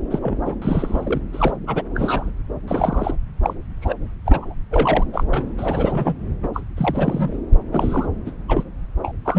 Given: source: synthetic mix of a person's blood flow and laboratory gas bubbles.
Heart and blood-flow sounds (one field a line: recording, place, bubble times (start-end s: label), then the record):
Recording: Doppler ultrasound of blood flow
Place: subclavian vein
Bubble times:
0.10-0.19 s: bubbles
0.21-0.39 s: bubbles
0.45-0.54 s: bubbles
0.61-1.21 s: bubbles
1.33-1.57 s: bubbles
1.67-1.83 s: bubbles
1.95-2.30 s: bubbles
2.68-3.16 s: bubbles
3.42-3.54 s: bubbles
3.81-3.96 s: bubbles
4.25-4.54 s: bubbles
4.71-5.06 s: bubbles
5.12-5.24 s: bubbles
5.33-5.51 s: bubbles
5.57-6.15 s: bubbles
6.42-6.48 s: bubbles
6.54-6.62 s: bubbles
6.77-7.39 s: bubbles
7.71-8.10 s: bubbles
8.26-8.31 s: bubbles
8.48-8.63 s: bubbles
9.04-9.12 s: bubbles
9.25-9.39 s: bubbles
From the record:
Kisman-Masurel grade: 342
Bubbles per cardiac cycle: rolling drumbeat, 9 or more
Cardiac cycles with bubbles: 100%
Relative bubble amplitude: moderate (0.250 to 0.450)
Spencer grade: 3 (all of the cardiac periods contain showers or single bubble signals, but not dominating or overriding the cardiac motion signals)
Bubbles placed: anywhere in the cardiac cycle